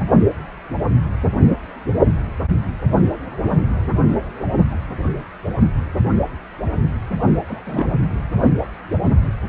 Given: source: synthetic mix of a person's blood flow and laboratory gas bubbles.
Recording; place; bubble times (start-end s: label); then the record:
Doppler ultrasound of blood flow; precordium
7.47-7.85 s: bubbles
From the record:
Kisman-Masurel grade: 112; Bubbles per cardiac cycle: 1 to 2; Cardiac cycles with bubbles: 1 to 10%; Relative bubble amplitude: moderate (0.250 to 0.450); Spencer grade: 1 (occasional bubble signal discernible with the cardiac motion signal, with majority of cardiac periods free of bubbles); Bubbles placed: only in the low amplitude regions of the cardiac cycle